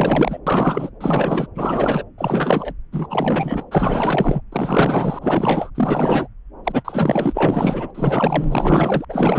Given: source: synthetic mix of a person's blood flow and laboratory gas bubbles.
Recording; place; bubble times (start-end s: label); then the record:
Doppler ultrasound of blood flow; subclavian vein
0.00-0.39 s: bubbles
0.46-0.89 s: bubbles
1.00-1.46 s: bubbles
1.55-2.04 s: bubbles
2.18-2.73 s: bubbles
2.92-3.66 s: bubbles
3.71-4.41 s: bubbles
4.52-5.70 s: bubbles
5.75-6.28 s: bubbles
6.65-7.91 s: bubbles
7.94-9.05 s: bubbles
9.09-9.39 s: bubbles
From the record:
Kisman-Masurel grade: 444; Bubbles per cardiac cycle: continuous sound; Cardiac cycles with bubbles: 100%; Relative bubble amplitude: maximal (0.775 to 0.999); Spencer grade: 4 (maximum detectable bubble signal sounding continuously throughout systole and diastole of every cardiac period, and overriding the amplitude of the normal cardiac signals); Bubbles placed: anywhere in the cardiac cycle